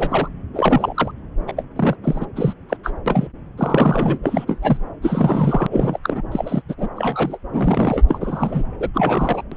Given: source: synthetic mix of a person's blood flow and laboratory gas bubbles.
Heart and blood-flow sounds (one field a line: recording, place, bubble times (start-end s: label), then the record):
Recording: Doppler ultrasound of blood flow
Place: subclavian vein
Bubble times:
0.00-0.28 s: bubbles
0.53-1.11 s: bubbles
1.47-1.52 s: bubbles
1.56-1.64 s: bubbles
1.76-1.95 s: bubbles
2.04-2.26 s: bubbles
2.35-2.54 s: bubbles
2.69-2.77 s: bubbles
2.83-2.92 s: bubbles
3.06-3.28 s: bubbles
3.57-4.19 s: bubbles
4.23-4.58 s: bubbles
4.62-4.78 s: bubbles
5.02-5.67 s: bubbles
5.71-6.00 s: bubbles
6.03-6.22 s: bubbles
6.32-6.62 s: bubbles
6.69-6.75 s: bubbles
6.78-6.88 s: bubbles
6.97-7.38 s: bubbles
7.53-8.03 s: bubbles
8.08-8.63 s: bubbles
8.79-8.89 s: bubbles
8.93-9.42 s: bubbles
9.51-9.57 s: bubbles
From the record:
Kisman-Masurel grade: 243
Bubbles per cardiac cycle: several, 3 to 8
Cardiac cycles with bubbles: 100%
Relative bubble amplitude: loud (0.450 to 0.775)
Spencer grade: 3 (all of the cardiac periods contain showers or single bubble signals, but not dominating or overriding the cardiac motion signals)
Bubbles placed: anywhere in the cardiac cycle